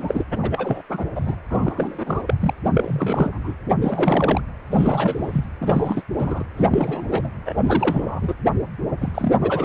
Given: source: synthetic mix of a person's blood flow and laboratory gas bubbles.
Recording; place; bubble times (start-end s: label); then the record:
Doppler ultrasound of blood flow; precordium
0.00-0.24 s: bubbles
0.42-0.83 s: bubbles
0.90-1.07 s: bubbles
1.15-1.36 s: bubbles
1.50-2.22 s: bubbles
2.27-2.34 s: bubbles
2.40-2.54 s: bubbles
2.65-2.71 s: bubbles
2.74-3.57 s: bubbles
3.81-4.42 s: bubbles
4.71-5.46 s: bubbles
5.61-6.02 s: bubbles
6.16-6.43 s: bubbles
6.56-7.29 s: bubbles
7.46-7.54 s: bubbles
7.58-7.62 s: bubbles
7.66-8.33 s: bubbles
9.01-9.35 s: bubbles
9.40-9.65 s: bubbles
From the record:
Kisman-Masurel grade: 343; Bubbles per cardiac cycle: rolling drumbeat, 9 or more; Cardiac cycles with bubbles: 100%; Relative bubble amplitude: loud (0.450 to 0.775); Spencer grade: 3 (all of the cardiac periods contain showers or single bubble signals, but not dominating or overriding the cardiac motion signals); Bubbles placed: anywhere in the cardiac cycle